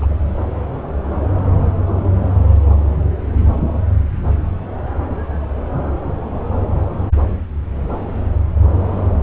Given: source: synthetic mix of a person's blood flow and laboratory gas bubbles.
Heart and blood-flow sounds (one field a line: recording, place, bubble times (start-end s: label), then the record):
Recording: Doppler ultrasound of blood flow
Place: subclavian vein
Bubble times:
0.00-0.16 s: bubbles
From the record:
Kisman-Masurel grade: 111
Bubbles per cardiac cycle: 1 to 2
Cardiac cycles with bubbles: 1 to 10%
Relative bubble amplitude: barely perceptible (0.100 to 0.250)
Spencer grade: 1 (occasional bubble signal discernible with the cardiac motion signal, with majority of cardiac periods free of bubbles)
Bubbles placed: anywhere in the cardiac cycle